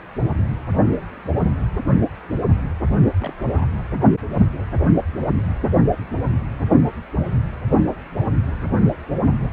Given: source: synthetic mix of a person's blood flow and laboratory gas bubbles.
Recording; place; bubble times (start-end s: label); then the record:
Doppler ultrasound of blood flow; precordium
3.20-3.66 s: bubbles
3.69-3.72 s: bubbles
3.74-3.82 s: bubbles
From the record:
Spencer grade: 1 (occasional bubble signal discernible with the cardiac motion signal, with majority of cardiac periods free of bubbles); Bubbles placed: only in the low amplitude regions of the cardiac cycle